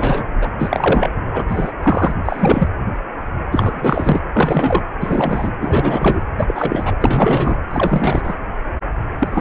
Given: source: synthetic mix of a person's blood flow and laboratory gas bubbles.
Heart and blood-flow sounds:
Doppler ultrasound of blood flow; precordium
0.00-0.24 s: bubbles
0.41-0.51 s: bubbles
0.58-1.14 s: bubbles
1.31-1.44 s: bubbles
1.49-1.72 s: bubbles
1.83-2.14 s: bubbles
2.25-2.68 s: bubbles
3.52-4.20 s: bubbles
4.33-4.82 s: bubbles
5.01-5.52 s: bubbles
5.61-6.25 s: bubbles
6.38-6.96 s: bubbles
7.01-7.57 s: bubbles
7.71-8.35 s: bubbles
9.19-9.41 s: bubbles
From the record:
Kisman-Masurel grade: 333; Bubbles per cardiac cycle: rolling drumbeat, 9 or more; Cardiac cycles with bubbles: 50 to 99%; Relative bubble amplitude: loud (0.450 to 0.775); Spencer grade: 3 (all of the cardiac periods contain showers or single bubble signals, but not dominating or overriding the cardiac motion signals); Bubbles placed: anywhere in the cardiac cycle

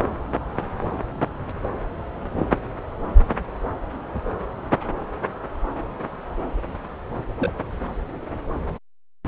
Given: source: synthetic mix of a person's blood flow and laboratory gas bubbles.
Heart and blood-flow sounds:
Doppler ultrasound of blood flow; subclavian vein
7.35-7.53 s: bubbles
From the record:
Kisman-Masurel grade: 111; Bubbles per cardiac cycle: 1 to 2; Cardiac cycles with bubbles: 1 to 10%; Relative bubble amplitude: barely perceptible (0.100 to 0.250); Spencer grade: 1 (occasional bubble signal discernible with the cardiac motion signal, with majority of cardiac periods free of bubbles); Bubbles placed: anywhere in the cardiac cycle

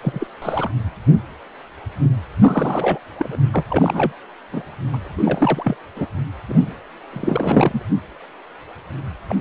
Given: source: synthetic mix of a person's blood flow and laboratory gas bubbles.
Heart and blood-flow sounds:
Doppler ultrasound of blood flow; precordium
0.02-0.27 s: bubbles
0.42-0.70 s: bubbles
2.41-3.00 s: bubbles
3.19-3.37 s: bubbles
3.53-3.64 s: bubbles
3.69-4.12 s: bubbles
4.53-4.62 s: bubbles
4.93-4.97 s: bubbles
5.02-5.77 s: bubbles
5.96-6.06 s: bubbles
6.46-6.75 s: bubbles
7.11-7.82 s: bubbles
9.29-9.35 s: bubbles
From the record:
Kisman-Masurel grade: 332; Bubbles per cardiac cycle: rolling drumbeat, 9 or more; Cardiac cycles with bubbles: 50 to 99%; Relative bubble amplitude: moderate (0.250 to 0.450); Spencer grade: 3 (all of the cardiac periods contain showers or single bubble signals, but not dominating or overriding the cardiac motion signals); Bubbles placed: anywhere in the cardiac cycle

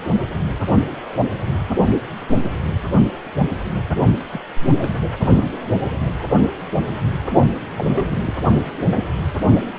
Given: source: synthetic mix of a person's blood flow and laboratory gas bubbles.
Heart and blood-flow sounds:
Doppler ultrasound of blood flow; precordium
4.30-4.42 s: bubbles
4.81-4.88 s: bubbles
7.76-8.33 s: bubbles
From the record:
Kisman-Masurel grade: 221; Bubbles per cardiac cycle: several, 3 to 8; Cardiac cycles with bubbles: 10 to 50%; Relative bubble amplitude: barely perceptible (0.100 to 0.250); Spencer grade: 2 (many but less than half of the cardiac periods contain bubble signals, singularly or in groups); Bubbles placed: only in the low amplitude regions of the cardiac cycle

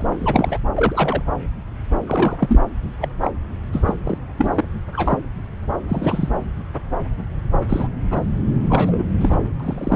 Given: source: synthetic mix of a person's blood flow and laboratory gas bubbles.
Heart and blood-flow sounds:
Doppler ultrasound of blood flow; subclavian vein
0.00-0.07 s: bubbles
0.18-0.60 s: bubbles
0.74-1.22 s: bubbles
2.06-2.36 s: bubbles
2.39-2.59 s: bubbles
3.01-3.09 s: bubbles
3.20-3.31 s: bubbles
3.73-3.93 s: bubbles
4.04-4.18 s: bubbles
4.37-4.65 s: bubbles
4.93-5.23 s: bubbles
5.89-6.29 s: bubbles
7.69-7.88 s: bubbles
8.11-8.22 s: bubbles
8.70-9.03 s: bubbles
9.20-9.40 s: bubbles
9.60-9.96 s: bubbles
From the record:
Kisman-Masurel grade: 232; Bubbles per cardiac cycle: several, 3 to 8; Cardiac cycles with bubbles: 50 to 99%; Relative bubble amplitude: moderate (0.250 to 0.450); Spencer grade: 3 (all of the cardiac periods contain showers or single bubble signals, but not dominating or overriding the cardiac motion signals); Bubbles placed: anywhere in the cardiac cycle

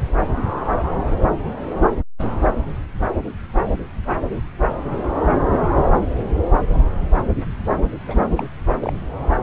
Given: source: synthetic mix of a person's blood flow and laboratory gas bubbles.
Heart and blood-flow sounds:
Doppler ultrasound of blood flow; subclavian vein
8.06-8.33 s: bubbles
8.37-8.45 s: bubbles
8.81-8.93 s: bubbles
From the record:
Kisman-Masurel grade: 211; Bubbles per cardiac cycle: several, 3 to 8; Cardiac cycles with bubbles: 1 to 10%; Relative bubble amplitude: barely perceptible (0.100 to 0.250); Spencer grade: 1 (occasional bubble signal discernible with the cardiac motion signal, with majority of cardiac periods free of bubbles); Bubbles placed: anywhere in the cardiac cycle

